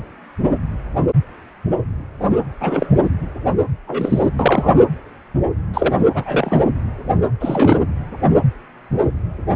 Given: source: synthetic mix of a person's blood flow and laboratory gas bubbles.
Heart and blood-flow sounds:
Doppler ultrasound of blood flow; precordium
2.60-3.09 s: bubbles
3.87-4.29 s: bubbles
4.39-4.84 s: bubbles
5.74-5.93 s: bubbles
6.14-6.63 s: bubbles
7.40-7.79 s: bubbles
From the record:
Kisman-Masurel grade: 223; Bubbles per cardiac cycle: several, 3 to 8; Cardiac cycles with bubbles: 10 to 50%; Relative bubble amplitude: loud (0.450 to 0.775); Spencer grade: 2 (many but less than half of the cardiac periods contain bubble signals, singularly or in groups); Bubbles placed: anywhere in the cardiac cycle

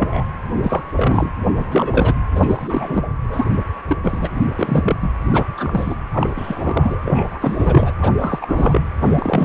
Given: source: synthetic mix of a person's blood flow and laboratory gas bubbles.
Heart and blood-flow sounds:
Doppler ultrasound of blood flow; precordium
0.00-0.24 s: bubbles
0.63-1.31 s: bubbles
1.56-2.14 s: bubbles
2.35-3.03 s: bubbles
3.27-3.46 s: bubbles
3.89-3.97 s: bubbles
4.03-4.29 s: bubbles
4.57-5.11 s: bubbles
5.30-5.45 s: bubbles
5.57-5.96 s: bubbles
6.13-6.29 s: bubbles
6.36-7.00 s: bubbles
7.04-7.92 s: bubbles
8.00-8.12 s: bubbles
8.18-8.81 s: bubbles
9.01-9.44 s: bubbles
From the record:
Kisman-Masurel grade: 342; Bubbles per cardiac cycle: rolling drumbeat, 9 or more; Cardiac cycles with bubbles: 100%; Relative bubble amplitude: moderate (0.250 to 0.450); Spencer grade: 3 (all of the cardiac periods contain showers or single bubble signals, but not dominating or overriding the cardiac motion signals); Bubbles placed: anywhere in the cardiac cycle

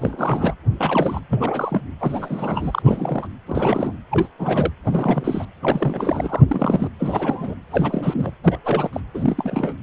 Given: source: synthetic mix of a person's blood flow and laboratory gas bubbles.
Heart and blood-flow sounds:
Doppler ultrasound of blood flow; precordium
0.00-0.54 s: bubbles
0.79-1.21 s: bubbles
1.29-1.81 s: bubbles
2.00-3.27 s: bubbles
3.47-3.96 s: bubbles
4.11-4.28 s: bubbles
4.39-4.71 s: bubbles
4.85-5.45 s: bubbles
5.63-6.42 s: bubbles
6.48-6.89 s: bubbles
6.99-7.55 s: bubbles
7.71-8.32 s: bubbles
8.44-8.58 s: bubbles
8.64-8.90 s: bubbles
8.93-9.01 s: bubbles
9.14-9.73 s: bubbles
From the record:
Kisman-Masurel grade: 342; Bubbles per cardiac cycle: rolling drumbeat, 9 or more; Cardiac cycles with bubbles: 100%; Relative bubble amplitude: moderate (0.250 to 0.450); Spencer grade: 3 (all of the cardiac periods contain showers or single bubble signals, but not dominating or overriding the cardiac motion signals); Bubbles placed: anywhere in the cardiac cycle

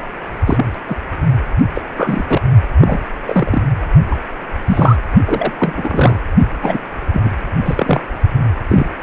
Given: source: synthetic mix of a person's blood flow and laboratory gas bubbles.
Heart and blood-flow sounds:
Doppler ultrasound of blood flow; precordium
0.46-0.65 s: bubbles
0.87-0.98 s: bubbles
1.74-1.82 s: bubbles
1.97-2.42 s: bubbles
2.81-3.00 s: bubbles
3.25-3.62 s: bubbles
4.11-4.16 s: bubbles
4.66-4.96 s: bubbles
5.25-5.53 s: bubbles
5.60-6.21 s: bubbles
6.62-6.79 s: bubbles
7.12-7.31 s: bubbles
7.65-8.01 s: bubbles
8.68-8.87 s: bubbles
From the record:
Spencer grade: 3 (all of the cardiac periods contain showers or single bubble signals, but not dominating or overriding the cardiac motion signals); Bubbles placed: only in the low amplitude regions of the cardiac cycle

